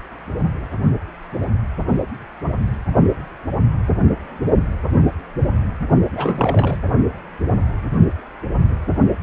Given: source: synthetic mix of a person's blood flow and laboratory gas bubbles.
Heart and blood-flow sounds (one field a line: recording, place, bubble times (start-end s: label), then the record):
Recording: Doppler ultrasound of blood flow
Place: precordium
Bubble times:
6.15-6.78 s: bubbles
From the record:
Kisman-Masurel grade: 212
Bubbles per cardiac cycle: several, 3 to 8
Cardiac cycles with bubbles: 1 to 10%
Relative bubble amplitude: moderate (0.250 to 0.450)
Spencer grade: 1 (occasional bubble signal discernible with the cardiac motion signal, with majority of cardiac periods free of bubbles)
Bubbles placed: only in the low amplitude regions of the cardiac cycle